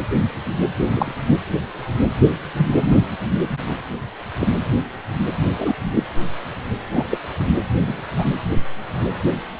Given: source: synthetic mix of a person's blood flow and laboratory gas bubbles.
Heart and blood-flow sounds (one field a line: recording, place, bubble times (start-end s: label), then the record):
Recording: Doppler ultrasound of blood flow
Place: precordium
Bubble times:
0.94-1.11 s: bubbles
4.39-4.47 s: bubbles
5.59-5.72 s: bubbles
5.93-6.03 s: bubbles
6.92-7.18 s: bubbles
7.86-8.02 s: bubbles
8.19-8.24 s: bubbles
From the record:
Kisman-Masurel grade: 123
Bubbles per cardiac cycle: 1 to 2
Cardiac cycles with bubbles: 10 to 50%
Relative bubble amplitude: loud (0.450 to 0.775)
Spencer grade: 2 (many but less than half of the cardiac periods contain bubble signals, singularly or in groups)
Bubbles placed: anywhere in the cardiac cycle